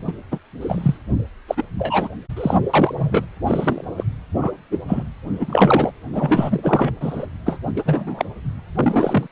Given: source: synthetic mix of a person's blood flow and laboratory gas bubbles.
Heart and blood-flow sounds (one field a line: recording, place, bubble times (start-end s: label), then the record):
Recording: Doppler ultrasound of blood flow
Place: precordium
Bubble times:
0.07-0.12 s: bubbles
0.31-0.39 s: bubbles
0.61-0.97 s: bubbles
1.48-1.64 s: bubbles
1.78-2.08 s: bubbles
2.37-2.58 s: bubbles
2.73-2.95 s: bubbles
2.98-3.27 s: bubbles
3.46-3.85 s: bubbles
3.98-4.03 s: bubbles
4.41-4.52 s: bubbles
4.71-4.78 s: bubbles
4.88-5.03 s: bubbles
5.27-5.91 s: bubbles
6.12-6.94 s: bubbles
7.00-7.26 s: bubbles
7.46-7.59 s: bubbles
7.75-8.25 s: bubbles
8.75-9.27 s: bubbles
From the record:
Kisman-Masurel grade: 243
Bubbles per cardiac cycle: several, 3 to 8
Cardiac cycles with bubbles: 100%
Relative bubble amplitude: loud (0.450 to 0.775)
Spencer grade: 3 (all of the cardiac periods contain showers or single bubble signals, but not dominating or overriding the cardiac motion signals)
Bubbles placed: anywhere in the cardiac cycle